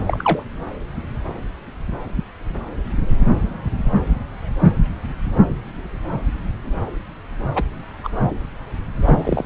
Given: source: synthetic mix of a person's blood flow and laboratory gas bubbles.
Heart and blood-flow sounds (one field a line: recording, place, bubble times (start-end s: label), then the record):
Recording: Doppler ultrasound of blood flow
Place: subclavian vein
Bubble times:
0.07-0.43 s: bubbles
7.55-7.63 s: bubbles
8.03-8.10 s: bubbles
9.04-9.46 s: bubbles
From the record:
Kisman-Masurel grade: 123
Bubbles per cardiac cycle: 1 to 2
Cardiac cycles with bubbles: 10 to 50%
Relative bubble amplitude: loud (0.450 to 0.775)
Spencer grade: 2 (many but less than half of the cardiac periods contain bubble signals, singularly or in groups)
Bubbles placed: anywhere in the cardiac cycle